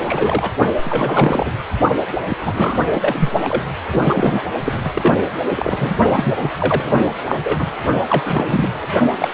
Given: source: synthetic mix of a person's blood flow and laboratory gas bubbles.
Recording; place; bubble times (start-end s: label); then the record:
Doppler ultrasound of blood flow; precordium
0.00-0.51 s: bubbles
0.84-1.50 s: bubbles
2.29-2.37 s: bubbles
2.42-2.82 s: bubbles
2.93-3.29 s: bubbles
3.42-3.64 s: bubbles
3.92-4.01 s: bubbles
4.04-4.43 s: bubbles
4.60-4.92 s: bubbles
4.95-5.18 s: bubbles
5.55-5.97 s: bubbles
6.11-6.33 s: bubbles
6.39-6.49 s: bubbles
6.58-7.03 s: bubbles
7.27-7.35 s: bubbles
7.43-7.70 s: bubbles
8.08-8.70 s: bubbles
8.82-8.87 s: bubbles
9.19-9.28 s: bubbles
From the record:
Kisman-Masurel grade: 342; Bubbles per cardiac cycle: rolling drumbeat, 9 or more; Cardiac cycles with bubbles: 100%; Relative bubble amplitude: moderate (0.250 to 0.450); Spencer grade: 3 (all of the cardiac periods contain showers or single bubble signals, but not dominating or overriding the cardiac motion signals); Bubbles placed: only in the low amplitude regions of the cardiac cycle